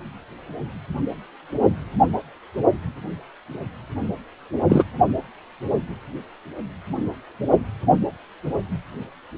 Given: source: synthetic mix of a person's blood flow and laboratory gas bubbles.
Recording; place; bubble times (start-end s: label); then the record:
Doppler ultrasound of blood flow; precordium
4.69-4.84 s: bubbles
From the record:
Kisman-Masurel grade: 113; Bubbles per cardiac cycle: 1 to 2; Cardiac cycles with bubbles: 1 to 10%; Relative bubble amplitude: loud (0.450 to 0.775); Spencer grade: 1 (occasional bubble signal discernible with the cardiac motion signal, with majority of cardiac periods free of bubbles); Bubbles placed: only in the low amplitude regions of the cardiac cycle